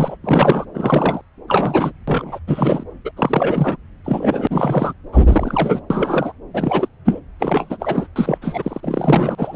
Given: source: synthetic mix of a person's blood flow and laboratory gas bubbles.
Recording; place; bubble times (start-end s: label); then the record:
Doppler ultrasound of blood flow; subclavian vein
0.00-0.17 s: bubbles
0.24-0.65 s: bubbles
0.73-1.21 s: bubbles
1.48-1.93 s: bubbles
2.07-2.39 s: bubbles
2.47-2.83 s: bubbles
3.04-3.11 s: bubbles
3.16-3.76 s: bubbles
4.04-4.48 s: bubbles
4.50-4.93 s: bubbles
5.12-5.80 s: bubbles
5.90-6.33 s: bubbles
6.54-6.88 s: bubbles
7.04-7.20 s: bubbles
7.39-7.77 s: bubbles
7.80-8.07 s: bubbles
8.15-8.38 s: bubbles
8.41-8.80 s: bubbles
8.83-9.56 s: bubbles
From the record:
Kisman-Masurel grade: 343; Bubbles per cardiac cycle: rolling drumbeat, 9 or more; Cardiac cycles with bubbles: 100%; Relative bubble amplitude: loud (0.450 to 0.775); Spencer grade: 3 (all of the cardiac periods contain showers or single bubble signals, but not dominating or overriding the cardiac motion signals); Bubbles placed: anywhere in the cardiac cycle